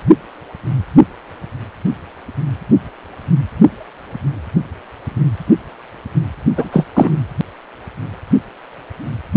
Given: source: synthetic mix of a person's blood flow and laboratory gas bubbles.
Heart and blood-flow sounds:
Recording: Doppler ultrasound of blood flow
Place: precordium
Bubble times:
6.56-6.68 s: bubbles
6.71-6.85 s: bubbles
6.95-7.18 s: bubbles
From the record:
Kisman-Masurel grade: 213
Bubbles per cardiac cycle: several, 3 to 8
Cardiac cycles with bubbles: 1 to 10%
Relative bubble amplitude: loud (0.450 to 0.775)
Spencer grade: 1 (occasional bubble signal discernible with the cardiac motion signal, with majority of cardiac periods free of bubbles)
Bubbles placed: only in the low amplitude regions of the cardiac cycle

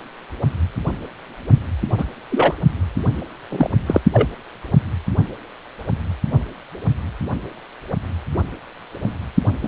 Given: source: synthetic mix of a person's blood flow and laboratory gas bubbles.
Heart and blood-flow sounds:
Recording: Doppler ultrasound of blood flow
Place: precordium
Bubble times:
1.97-2.05 s: bubbles
2.31-2.54 s: bubbles
3.50-3.69 s: bubbles
3.86-4.00 s: bubbles
4.12-4.28 s: bubbles
9.63-9.68 s: bubbles
From the record:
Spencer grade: 2 (many but less than half of the cardiac periods contain bubble signals, singularly or in groups)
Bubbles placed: only in the low amplitude regions of the cardiac cycle

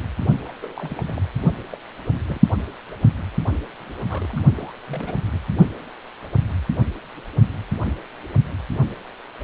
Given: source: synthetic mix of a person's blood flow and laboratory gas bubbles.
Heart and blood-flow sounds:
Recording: Doppler ultrasound of blood flow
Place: precordium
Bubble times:
0.45-0.52 s: bubbles
0.61-1.02 s: bubbles
1.05-1.22 s: bubbles
1.71-1.77 s: bubbles
2.27-2.40 s: bubbles
3.85-3.93 s: bubbles
4.02-4.05 s: bubbles
4.09-4.45 s: bubbles
4.54-4.73 s: bubbles
4.88-5.17 s: bubbles
5.34-5.39 s: bubbles
From the record:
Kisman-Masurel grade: 221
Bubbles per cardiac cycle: several, 3 to 8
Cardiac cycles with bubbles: 10 to 50%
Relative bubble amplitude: barely perceptible (0.100 to 0.250)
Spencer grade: 2 (many but less than half of the cardiac periods contain bubble signals, singularly or in groups)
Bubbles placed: only in the low amplitude regions of the cardiac cycle

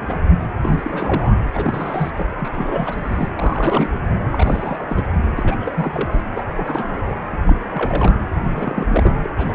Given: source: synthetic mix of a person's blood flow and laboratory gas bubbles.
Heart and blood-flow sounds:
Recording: Doppler ultrasound of blood flow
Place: precordium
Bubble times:
0.01-0.18 s: bubbles
0.29-0.37 s: bubbles
0.61-1.35 s: bubbles
1.53-2.11 s: bubbles
2.17-2.25 s: bubbles
2.38-3.31 s: bubbles
3.35-3.90 s: bubbles
4.30-5.04 s: bubbles
5.37-6.23 s: bubbles
6.35-6.44 s: bubbles
6.57-7.03 s: bubbles
7.09-7.15 s: bubbles
7.32-7.37 s: bubbles
7.46-7.59 s: bubbles
7.71-8.19 s: bubbles
8.49-8.86 s: bubbles
8.91-9.13 s: bubbles
9.22-9.30 s: bubbles
9.37-9.54 s: bubbles
From the record:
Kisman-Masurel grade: 342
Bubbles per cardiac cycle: rolling drumbeat, 9 or more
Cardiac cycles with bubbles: 100%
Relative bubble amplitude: moderate (0.250 to 0.450)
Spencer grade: 3 (all of the cardiac periods contain showers or single bubble signals, but not dominating or overriding the cardiac motion signals)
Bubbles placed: anywhere in the cardiac cycle

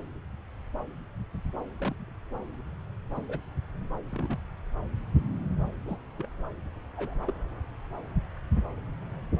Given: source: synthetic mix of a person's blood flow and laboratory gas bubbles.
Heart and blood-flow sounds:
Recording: Doppler ultrasound of blood flow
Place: subclavian vein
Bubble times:
1.79-2.04 s: bubbles
2.08-2.14 s: bubbles
3.15-3.39 s: bubbles
4.12-4.38 s: bubbles
5.87-5.98 s: bubbles
6.17-6.28 s: bubbles
6.97-7.14 s: bubbles
7.27-7.32 s: bubbles
From the record:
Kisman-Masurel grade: 121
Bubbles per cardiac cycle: 1 to 2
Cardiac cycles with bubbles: 10 to 50%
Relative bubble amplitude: barely perceptible (0.100 to 0.250)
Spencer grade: 2 (many but less than half of the cardiac periods contain bubble signals, singularly or in groups)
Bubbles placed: anywhere in the cardiac cycle

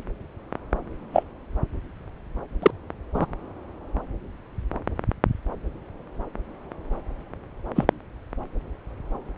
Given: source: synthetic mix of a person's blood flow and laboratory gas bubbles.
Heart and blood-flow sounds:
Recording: Doppler ultrasound of blood flow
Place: subclavian vein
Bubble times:
1.12-1.23 s: bubbles
2.62-2.71 s: bubbles
3.14-3.26 s: bubbles
7.75-7.84 s: bubbles
From the record:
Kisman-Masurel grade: 123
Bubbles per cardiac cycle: 1 to 2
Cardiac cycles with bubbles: 10 to 50%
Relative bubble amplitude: loud (0.450 to 0.775)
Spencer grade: 2 (many but less than half of the cardiac periods contain bubble signals, singularly or in groups)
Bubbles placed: anywhere in the cardiac cycle

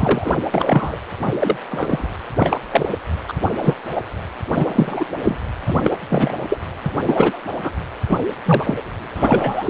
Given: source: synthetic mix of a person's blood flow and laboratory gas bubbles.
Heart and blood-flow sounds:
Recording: Doppler ultrasound of blood flow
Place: precordium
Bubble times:
0.00-0.31 s: bubbles
0.54-0.98 s: bubbles
1.25-1.56 s: bubbles
1.71-2.07 s: bubbles
2.35-2.58 s: bubbles
2.71-2.93 s: bubbles
3.28-3.34 s: bubbles
3.42-3.50 s: bubbles
3.61-3.76 s: bubbles
3.95-4.02 s: bubbles
4.54-5.05 s: bubbles
5.22-5.37 s: bubbles
5.66-5.97 s: bubbles
6.10-6.58 s: bubbles
6.86-6.91 s: bubbles
7.01-7.40 s: bubbles
7.62-7.71 s: bubbles
8.08-8.18 s: bubbles
8.45-8.82 s: bubbles
9.15-9.70 s: bubbles
From the record:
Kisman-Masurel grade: 243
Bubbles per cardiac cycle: several, 3 to 8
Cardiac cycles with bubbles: 100%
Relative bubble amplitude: loud (0.450 to 0.775)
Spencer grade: 3 (all of the cardiac periods contain showers or single bubble signals, but not dominating or overriding the cardiac motion signals)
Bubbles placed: anywhere in the cardiac cycle

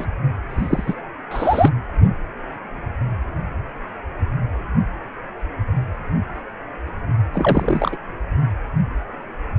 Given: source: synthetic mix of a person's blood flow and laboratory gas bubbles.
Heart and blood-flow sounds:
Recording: Doppler ultrasound of blood flow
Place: precordium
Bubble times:
0.00-0.06 s: bubbles
0.50-0.95 s: bubbles
1.31-1.70 s: bubbles
7.32-7.97 s: bubbles
From the record:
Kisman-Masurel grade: 223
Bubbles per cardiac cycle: several, 3 to 8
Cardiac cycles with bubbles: 10 to 50%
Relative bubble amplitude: loud (0.450 to 0.775)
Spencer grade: 2 (many but less than half of the cardiac periods contain bubble signals, singularly or in groups)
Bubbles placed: anywhere in the cardiac cycle

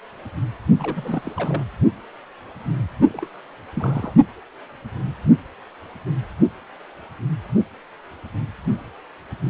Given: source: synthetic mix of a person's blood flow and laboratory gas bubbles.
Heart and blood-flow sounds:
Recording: Doppler ultrasound of blood flow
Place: precordium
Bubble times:
0.78-1.65 s: bubbles
3.08-3.27 s: bubbles
3.74-4.13 s: bubbles
From the record:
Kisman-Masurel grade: 221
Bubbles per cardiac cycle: several, 3 to 8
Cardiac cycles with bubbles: 10 to 50%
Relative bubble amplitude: barely perceptible (0.100 to 0.250)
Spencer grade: 2 (many but less than half of the cardiac periods contain bubble signals, singularly or in groups)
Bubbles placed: only in the low amplitude regions of the cardiac cycle

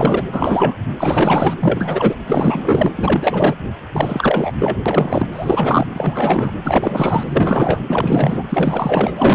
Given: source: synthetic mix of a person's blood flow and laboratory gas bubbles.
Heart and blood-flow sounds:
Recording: Doppler ultrasound of blood flow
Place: precordium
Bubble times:
0.00-0.24 s: bubbles
0.32-0.78 s: bubbles
0.98-1.54 s: bubbles
1.60-2.16 s: bubbles
2.25-2.91 s: bubbles
2.96-3.55 s: bubbles
3.93-4.52 s: bubbles
4.59-4.77 s: bubbles
4.86-5.28 s: bubbles
5.31-5.87 s: bubbles
5.94-6.53 s: bubbles
6.63-7.23 s: bubbles
7.27-7.80 s: bubbles
7.88-8.45 s: bubbles
8.48-9.13 s: bubbles
9.16-9.35 s: bubbles
From the record:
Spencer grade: 4 (maximum detectable bubble signal sounding continuously throughout systole and diastole of every cardiac period, and overriding the amplitude of the normal cardiac signals)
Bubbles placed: anywhere in the cardiac cycle

